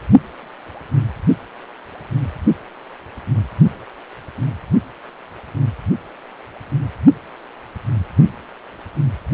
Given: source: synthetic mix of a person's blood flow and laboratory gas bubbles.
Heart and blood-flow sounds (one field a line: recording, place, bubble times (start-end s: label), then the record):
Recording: Doppler ultrasound of blood flow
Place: precordium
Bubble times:
no bubbles
From the record:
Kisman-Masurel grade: 000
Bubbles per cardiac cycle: 0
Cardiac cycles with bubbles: 0%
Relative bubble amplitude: no bubbles discernible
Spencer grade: 0 (complete lack of bubble signals)